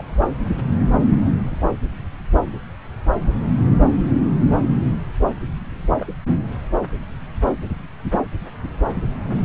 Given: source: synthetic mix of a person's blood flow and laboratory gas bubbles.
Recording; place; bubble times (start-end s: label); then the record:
Doppler ultrasound of blood flow; subclavian vein
0.00-0.03 s: bubbles
1.14-1.19 s: bubbles
1.51-1.75 s: bubbles
4.45-4.58 s: bubbles
5.99-6.07 s: bubbles
8.88-9.03 s: bubbles
From the record:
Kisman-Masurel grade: 121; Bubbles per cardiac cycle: 1 to 2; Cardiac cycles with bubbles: 10 to 50%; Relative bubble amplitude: barely perceptible (0.100 to 0.250); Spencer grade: 2 (many but less than half of the cardiac periods contain bubble signals, singularly or in groups); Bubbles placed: anywhere in the cardiac cycle